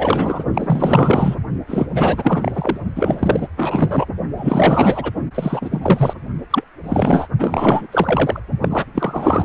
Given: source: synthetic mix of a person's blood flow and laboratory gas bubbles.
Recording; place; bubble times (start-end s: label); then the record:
Doppler ultrasound of blood flow; precordium
0.00-0.45 s: bubbles
0.53-1.35 s: bubbles
1.68-1.86 s: bubbles
1.93-2.78 s: bubbles
2.96-3.48 s: bubbles
3.56-4.06 s: bubbles
4.37-5.11 s: bubbles
5.35-6.14 s: bubbles
6.50-6.64 s: bubbles
6.83-7.27 s: bubbles
7.39-7.87 s: bubbles
7.92-8.40 s: bubbles
8.62-8.85 s: bubbles
8.95-9.45 s: bubbles
From the record:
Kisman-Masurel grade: 444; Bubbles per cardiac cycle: continuous sound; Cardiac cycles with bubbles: 100%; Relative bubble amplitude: maximal (0.775 to 0.999); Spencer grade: 4 (maximum detectable bubble signal sounding continuously throughout systole and diastole of every cardiac period, and overriding the amplitude of the normal cardiac signals); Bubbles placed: only in the low amplitude regions of the cardiac cycle